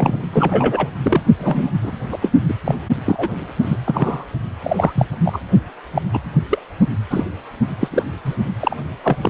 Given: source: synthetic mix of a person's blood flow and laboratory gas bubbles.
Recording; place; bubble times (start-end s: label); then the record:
Doppler ultrasound of blood flow; precordium
0.00-0.22 s: bubbles
0.32-0.89 s: bubbles
1.02-1.22 s: bubbles
1.39-1.70 s: bubbles
1.82-1.92 s: bubbles
2.10-2.19 s: bubbles
2.21-2.32 s: bubbles
2.48-2.54 s: bubbles
2.64-2.75 s: bubbles
3.06-3.35 s: bubbles
3.62-3.77 s: bubbles
3.86-4.25 s: bubbles
4.64-4.92 s: bubbles
4.95-5.08 s: bubbles
5.25-5.39 s: bubbles
5.94-6.02 s: bubbles
6.13-6.20 s: bubbles
6.50-6.58 s: bubbles
7.10-7.24 s: bubbles
7.80-8.03 s: bubbles
8.24-8.36 s: bubbles
8.61-8.76 s: bubbles
9.04-9.16 s: bubbles
9.21-9.30 s: bubbles
From the record:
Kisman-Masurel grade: 243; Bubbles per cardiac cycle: several, 3 to 8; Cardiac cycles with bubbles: 100%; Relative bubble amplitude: loud (0.450 to 0.775); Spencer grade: 3 (all of the cardiac periods contain showers or single bubble signals, but not dominating or overriding the cardiac motion signals); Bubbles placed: only in the low amplitude regions of the cardiac cycle